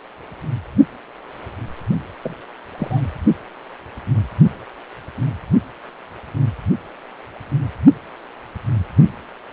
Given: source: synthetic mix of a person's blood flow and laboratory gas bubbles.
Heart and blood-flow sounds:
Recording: Doppler ultrasound of blood flow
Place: precordium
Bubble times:
2.22-2.34 s: bubbles
2.78-3.00 s: bubbles
From the record:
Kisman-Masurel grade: 111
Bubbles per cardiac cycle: 1 to 2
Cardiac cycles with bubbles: 1 to 10%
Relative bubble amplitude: barely perceptible (0.100 to 0.250)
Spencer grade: 1 (occasional bubble signal discernible with the cardiac motion signal, with majority of cardiac periods free of bubbles)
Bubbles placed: only in the low amplitude regions of the cardiac cycle

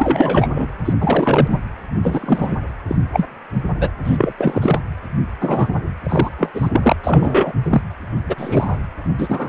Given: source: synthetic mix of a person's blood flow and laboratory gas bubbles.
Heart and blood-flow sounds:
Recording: Doppler ultrasound of blood flow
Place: precordium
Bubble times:
0.00-0.48 s: bubbles
0.54-0.68 s: bubbles
0.85-0.93 s: bubbles
1.01-1.48 s: bubbles
1.50-1.58 s: bubbles
2.02-2.56 s: bubbles
2.89-2.96 s: bubbles
3.12-3.25 s: bubbles
3.79-3.90 s: bubbles
4.04-4.33 s: bubbles
4.38-4.80 s: bubbles
5.40-5.73 s: bubbles
6.03-6.29 s: bubbles
6.38-6.51 s: bubbles
6.54-6.70 s: bubbles
6.72-6.96 s: bubbles
7.04-7.53 s: bubbles
7.63-7.81 s: bubbles
8.26-8.79 s: bubbles
9.18-9.49 s: bubbles
From the record:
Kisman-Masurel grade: 243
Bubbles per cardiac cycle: several, 3 to 8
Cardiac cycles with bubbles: 100%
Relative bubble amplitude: loud (0.450 to 0.775)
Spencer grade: 3 (all of the cardiac periods contain showers or single bubble signals, but not dominating or overriding the cardiac motion signals)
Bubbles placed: anywhere in the cardiac cycle

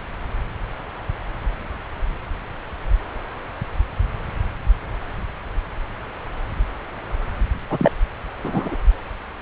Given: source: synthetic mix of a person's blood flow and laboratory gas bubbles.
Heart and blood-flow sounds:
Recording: Doppler ultrasound of blood flow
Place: subclavian vein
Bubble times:
7.69-7.91 s: bubbles
8.42-8.77 s: bubbles
From the record:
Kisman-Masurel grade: 212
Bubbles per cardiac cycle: several, 3 to 8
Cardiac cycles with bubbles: 1 to 10%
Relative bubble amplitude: moderate (0.250 to 0.450)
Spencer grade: 1 (occasional bubble signal discernible with the cardiac motion signal, with majority of cardiac periods free of bubbles)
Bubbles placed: anywhere in the cardiac cycle

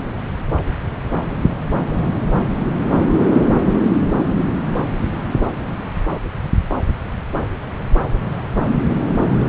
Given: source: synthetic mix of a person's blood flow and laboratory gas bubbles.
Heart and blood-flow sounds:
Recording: Doppler ultrasound of blood flow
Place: subclavian vein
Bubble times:
no bubbles
From the record:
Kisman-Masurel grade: 000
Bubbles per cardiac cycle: 0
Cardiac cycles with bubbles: 0%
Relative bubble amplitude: no bubbles discernible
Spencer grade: 0 (complete lack of bubble signals)

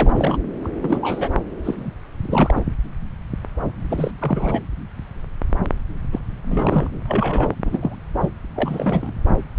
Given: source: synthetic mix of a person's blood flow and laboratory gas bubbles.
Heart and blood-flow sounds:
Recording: Doppler ultrasound of blood flow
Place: subclavian vein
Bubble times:
0.00-0.38 s: bubbles
0.64-0.68 s: bubbles
0.80-1.30 s: bubbles
1.64-1.91 s: bubbles
2.21-2.62 s: bubbles
3.89-4.12 s: bubbles
4.18-4.62 s: bubbles
6.12-6.21 s: bubbles
6.46-6.90 s: bubbles
7.08-7.55 s: bubbles
7.65-7.96 s: bubbles
8.20-8.29 s: bubbles
8.55-9.12 s: bubbles
From the record:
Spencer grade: 3 (all of the cardiac periods contain showers or single bubble signals, but not dominating or overriding the cardiac motion signals)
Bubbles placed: anywhere in the cardiac cycle

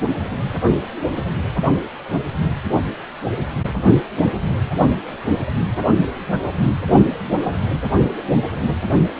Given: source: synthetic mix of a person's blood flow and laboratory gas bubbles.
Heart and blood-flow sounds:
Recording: Doppler ultrasound of blood flow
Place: precordium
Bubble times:
no bubbles
From the record:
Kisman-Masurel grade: 000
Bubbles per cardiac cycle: 0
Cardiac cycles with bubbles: 0%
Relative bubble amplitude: no bubbles discernible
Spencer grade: 0 (complete lack of bubble signals)

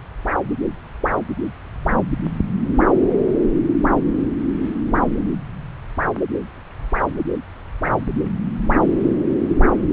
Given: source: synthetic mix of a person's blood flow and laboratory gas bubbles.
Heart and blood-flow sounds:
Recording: Doppler ultrasound of blood flow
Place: subclavian vein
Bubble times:
no bubbles
From the record:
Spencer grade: 0 (complete lack of bubble signals)

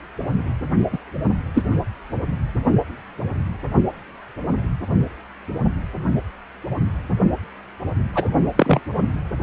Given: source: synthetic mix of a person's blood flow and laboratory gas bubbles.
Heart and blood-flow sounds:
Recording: Doppler ultrasound of blood flow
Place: precordium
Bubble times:
0.92-0.98 s: bubbles
1.54-1.62 s: bubbles
8.14-8.30 s: bubbles
8.56-8.79 s: bubbles
From the record:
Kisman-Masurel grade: 123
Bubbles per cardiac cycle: 1 to 2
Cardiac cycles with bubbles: 10 to 50%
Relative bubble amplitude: loud (0.450 to 0.775)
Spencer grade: 2 (many but less than half of the cardiac periods contain bubble signals, singularly or in groups)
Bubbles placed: only in the low amplitude regions of the cardiac cycle

